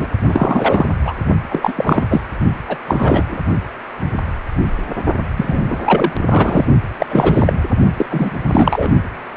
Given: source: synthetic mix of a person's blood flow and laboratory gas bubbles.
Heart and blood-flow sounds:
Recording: Doppler ultrasound of blood flow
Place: precordium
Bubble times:
0.00-0.08 s: bubbles
0.28-0.86 s: bubbles
1.05-1.15 s: bubbles
1.50-1.73 s: bubbles
1.76-2.07 s: bubbles
2.10-2.21 s: bubbles
2.68-2.77 s: bubbles
2.85-3.38 s: bubbles
5.37-5.63 s: bubbles
5.69-5.79 s: bubbles
5.84-6.12 s: bubbles
6.29-6.65 s: bubbles
6.99-7.53 s: bubbles
7.96-8.05 s: bubbles
8.10-8.32 s: bubbles
8.52-8.89 s: bubbles
From the record:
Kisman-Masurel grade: 333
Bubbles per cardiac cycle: rolling drumbeat, 9 or more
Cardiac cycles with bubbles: 50 to 99%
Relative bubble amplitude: loud (0.450 to 0.775)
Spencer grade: 3 (all of the cardiac periods contain showers or single bubble signals, but not dominating or overriding the cardiac motion signals)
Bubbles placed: only in the low amplitude regions of the cardiac cycle

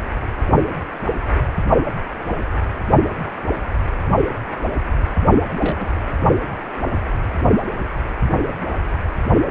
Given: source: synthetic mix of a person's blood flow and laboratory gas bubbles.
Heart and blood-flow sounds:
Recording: Doppler ultrasound of blood flow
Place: precordium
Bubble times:
5.60-5.97 s: bubbles
From the record:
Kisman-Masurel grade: 111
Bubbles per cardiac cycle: 1 to 2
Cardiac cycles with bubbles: 1 to 10%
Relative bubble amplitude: barely perceptible (0.100 to 0.250)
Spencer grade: 1 (occasional bubble signal discernible with the cardiac motion signal, with majority of cardiac periods free of bubbles)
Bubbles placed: only in the low amplitude regions of the cardiac cycle

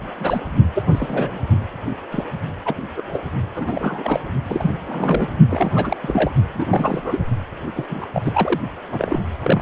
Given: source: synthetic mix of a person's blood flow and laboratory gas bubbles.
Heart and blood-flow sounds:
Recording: Doppler ultrasound of blood flow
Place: precordium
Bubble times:
0.20-0.41 s: bubbles
0.74-0.83 s: bubbles
0.92-1.46 s: bubbles
2.11-2.25 s: bubbles
2.65-2.75 s: bubbles
2.96-3.01 s: bubbles
3.13-3.20 s: bubbles
3.55-4.20 s: bubbles
4.42-4.72 s: bubbles
4.88-5.28 s: bubbles
5.50-5.71 s: bubbles
5.75-5.96 s: bubbles
6.02-6.30 s: bubbles
6.54-6.65 s: bubbles
6.70-7.20 s: bubbles
7.74-7.85 s: bubbles
7.89-8.05 s: bubbles
8.13-8.61 s: bubbles
8.92-9.19 s: bubbles
9.43-9.62 s: bubbles
From the record:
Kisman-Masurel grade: 242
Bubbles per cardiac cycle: several, 3 to 8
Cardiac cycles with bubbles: 100%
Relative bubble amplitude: moderate (0.250 to 0.450)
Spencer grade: 3 (all of the cardiac periods contain showers or single bubble signals, but not dominating or overriding the cardiac motion signals)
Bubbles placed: only in the low amplitude regions of the cardiac cycle

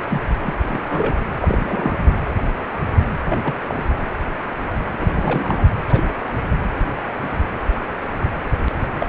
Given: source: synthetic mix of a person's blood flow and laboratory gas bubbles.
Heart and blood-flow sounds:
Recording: Doppler ultrasound of blood flow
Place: precordium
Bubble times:
0.00-0.05 s: bubbles
0.09-0.21 s: bubbles
0.42-0.54 s: bubbles
0.71-1.22 s: bubbles
1.41-2.04 s: bubbles
3.28-3.54 s: bubbles
3.67-3.75 s: bubbles
3.77-3.83 s: bubbles
5.00-5.66 s: bubbles
5.89-6.04 s: bubbles
8.99-9.06 s: bubbles
From the record:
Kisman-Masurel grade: 232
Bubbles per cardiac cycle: several, 3 to 8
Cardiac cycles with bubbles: 50 to 99%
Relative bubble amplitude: moderate (0.250 to 0.450)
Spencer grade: 3 (all of the cardiac periods contain showers or single bubble signals, but not dominating or overriding the cardiac motion signals)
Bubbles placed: anywhere in the cardiac cycle

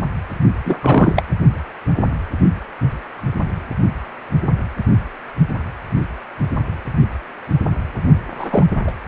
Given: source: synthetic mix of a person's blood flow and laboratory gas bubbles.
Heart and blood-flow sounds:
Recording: Doppler ultrasound of blood flow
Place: precordium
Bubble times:
0.65-0.78 s: bubbles
0.81-1.23 s: bubbles
8.37-8.64 s: bubbles
8.87-8.92 s: bubbles
From the record:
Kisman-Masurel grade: 223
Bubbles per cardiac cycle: several, 3 to 8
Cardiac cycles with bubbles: 10 to 50%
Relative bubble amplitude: loud (0.450 to 0.775)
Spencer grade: 2 (many but less than half of the cardiac periods contain bubble signals, singularly or in groups)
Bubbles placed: only in the low amplitude regions of the cardiac cycle

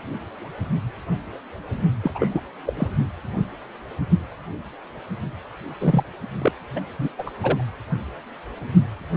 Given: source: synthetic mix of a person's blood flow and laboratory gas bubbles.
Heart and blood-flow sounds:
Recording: Doppler ultrasound of blood flow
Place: precordium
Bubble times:
2.02-2.11 s: bubbles
2.15-2.41 s: bubbles
2.66-2.74 s: bubbles
2.77-2.88 s: bubbles
5.80-6.04 s: bubbles
6.38-6.52 s: bubbles
6.75-6.80 s: bubbles
6.99-7.08 s: bubbles
7.18-7.24 s: bubbles
7.26-7.30 s: bubbles
7.43-7.63 s: bubbles
From the record:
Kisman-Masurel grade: 222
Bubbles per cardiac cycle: several, 3 to 8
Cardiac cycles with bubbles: 10 to 50%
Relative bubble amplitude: moderate (0.250 to 0.450)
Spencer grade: 2 (many but less than half of the cardiac periods contain bubble signals, singularly or in groups)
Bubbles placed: anywhere in the cardiac cycle

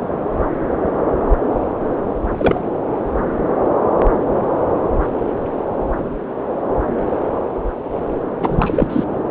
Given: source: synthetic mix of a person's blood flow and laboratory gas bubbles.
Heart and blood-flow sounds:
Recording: Doppler ultrasound of blood flow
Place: subclavian vein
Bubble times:
2.38-2.61 s: bubbles
8.41-9.04 s: bubbles
From the record:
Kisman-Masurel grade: 223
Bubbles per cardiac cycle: several, 3 to 8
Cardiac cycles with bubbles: 10 to 50%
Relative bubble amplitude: loud (0.450 to 0.775)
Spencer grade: 2 (many but less than half of the cardiac periods contain bubble signals, singularly or in groups)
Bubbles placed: anywhere in the cardiac cycle

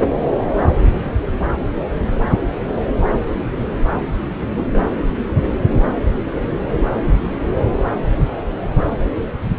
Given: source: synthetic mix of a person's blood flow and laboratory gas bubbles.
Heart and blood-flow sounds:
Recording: Doppler ultrasound of blood flow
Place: subclavian vein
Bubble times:
4.55-4.83 s: bubbles
From the record:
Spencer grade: 1 (occasional bubble signal discernible with the cardiac motion signal, with majority of cardiac periods free of bubbles)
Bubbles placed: anywhere in the cardiac cycle

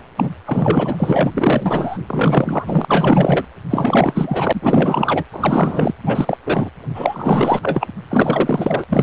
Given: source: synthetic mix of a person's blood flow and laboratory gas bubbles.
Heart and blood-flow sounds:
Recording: Doppler ultrasound of blood flow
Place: precordium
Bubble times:
0.16-0.31 s: bubbles
0.45-1.98 s: bubbles
2.07-2.85 s: bubbles
2.88-3.44 s: bubbles
3.70-5.25 s: bubbles
5.33-5.95 s: bubbles
6.04-6.37 s: bubbles
6.45-6.70 s: bubbles
6.95-7.88 s: bubbles
8.08-8.84 s: bubbles
8.89-9.03 s: bubbles
From the record:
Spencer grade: 4 (maximum detectable bubble signal sounding continuously throughout systole and diastole of every cardiac period, and overriding the amplitude of the normal cardiac signals)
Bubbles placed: anywhere in the cardiac cycle

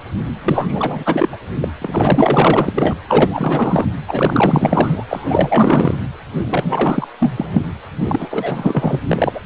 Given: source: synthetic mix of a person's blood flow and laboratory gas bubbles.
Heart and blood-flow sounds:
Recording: Doppler ultrasound of blood flow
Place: precordium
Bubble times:
0.00-0.02 s: bubbles
0.39-1.29 s: bubbles
1.32-1.38 s: bubbles
1.60-1.68 s: bubbles
1.81-2.94 s: bubbles
3.08-3.86 s: bubbles
4.07-5.04 s: bubbles
5.08-5.98 s: bubbles
6.38-7.07 s: bubbles
7.20-7.46 s: bubbles
7.50-7.62 s: bubbles
8.03-8.99 s: bubbles
9.08-9.39 s: bubbles
From the record:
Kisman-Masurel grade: 444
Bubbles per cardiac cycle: continuous sound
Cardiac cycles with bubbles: 100%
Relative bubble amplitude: maximal (0.775 to 0.999)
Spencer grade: 4 (maximum detectable bubble signal sounding continuously throughout systole and diastole of every cardiac period, and overriding the amplitude of the normal cardiac signals)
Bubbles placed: anywhere in the cardiac cycle

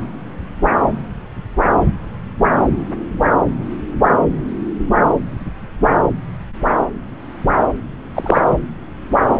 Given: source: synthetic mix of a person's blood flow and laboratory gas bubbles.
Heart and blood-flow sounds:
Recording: Doppler ultrasound of blood flow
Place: subclavian vein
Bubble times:
8.14-8.42 s: bubbles
From the record:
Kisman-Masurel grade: 113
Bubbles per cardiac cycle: 1 to 2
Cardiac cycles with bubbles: 1 to 10%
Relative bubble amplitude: loud (0.450 to 0.775)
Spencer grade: 1 (occasional bubble signal discernible with the cardiac motion signal, with majority of cardiac periods free of bubbles)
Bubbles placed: anywhere in the cardiac cycle

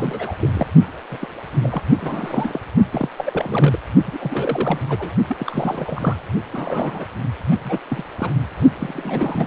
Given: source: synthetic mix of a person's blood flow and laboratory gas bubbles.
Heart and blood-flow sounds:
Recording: Doppler ultrasound of blood flow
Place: precordium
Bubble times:
0.00-0.35 s: bubbles
0.40-0.51 s: bubbles
0.53-0.67 s: bubbles
1.11-1.28 s: bubbles
1.63-1.82 s: bubbles
2.01-2.61 s: bubbles
2.92-3.09 s: bubbles
3.17-3.78 s: bubbles
4.06-4.79 s: bubbles
4.89-5.11 s: bubbles
5.29-6.17 s: bubbles
6.52-7.05 s: bubbles
7.50-7.57 s: bubbles
7.62-7.79 s: bubbles
7.88-8.04 s: bubbles
8.17-8.30 s: bubbles
8.79-9.47 s: bubbles
From the record:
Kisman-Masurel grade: 342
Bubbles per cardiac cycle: rolling drumbeat, 9 or more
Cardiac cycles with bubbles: 100%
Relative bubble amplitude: moderate (0.250 to 0.450)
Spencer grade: 3 (all of the cardiac periods contain showers or single bubble signals, but not dominating or overriding the cardiac motion signals)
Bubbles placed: only in the low amplitude regions of the cardiac cycle

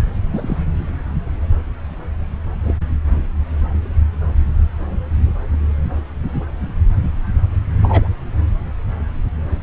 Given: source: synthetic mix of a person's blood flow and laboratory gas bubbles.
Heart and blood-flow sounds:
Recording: Doppler ultrasound of blood flow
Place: subclavian vein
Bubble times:
0.31-0.58 s: bubbles
2.63-2.74 s: bubbles
7.83-8.09 s: bubbles
From the record:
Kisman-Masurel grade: 122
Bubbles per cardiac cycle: 1 to 2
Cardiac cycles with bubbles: 10 to 50%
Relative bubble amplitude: moderate (0.250 to 0.450)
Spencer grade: 2 (many but less than half of the cardiac periods contain bubble signals, singularly or in groups)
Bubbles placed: anywhere in the cardiac cycle

